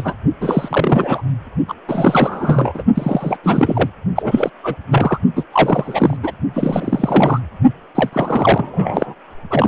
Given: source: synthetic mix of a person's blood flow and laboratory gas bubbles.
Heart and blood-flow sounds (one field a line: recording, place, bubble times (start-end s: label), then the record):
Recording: Doppler ultrasound of blood flow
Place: precordium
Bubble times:
0.00-0.15 s: bubbles
0.40-1.23 s: bubbles
1.68-1.74 s: bubbles
1.88-2.83 s: bubbles
2.94-3.37 s: bubbles
3.43-3.90 s: bubbles
4.16-4.50 s: bubbles
4.63-4.76 s: bubbles
4.91-5.19 s: bubbles
5.36-5.44 s: bubbles
5.52-6.17 s: bubbles
6.23-6.32 s: bubbles
6.54-7.40 s: bubbles
7.95-8.10 s: bubbles
8.12-9.14 s: bubbles
9.50-9.68 s: bubbles
From the record:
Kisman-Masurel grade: 343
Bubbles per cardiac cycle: rolling drumbeat, 9 or more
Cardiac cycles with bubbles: 100%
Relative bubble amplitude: loud (0.450 to 0.775)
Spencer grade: 3 (all of the cardiac periods contain showers or single bubble signals, but not dominating or overriding the cardiac motion signals)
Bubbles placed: only in the low amplitude regions of the cardiac cycle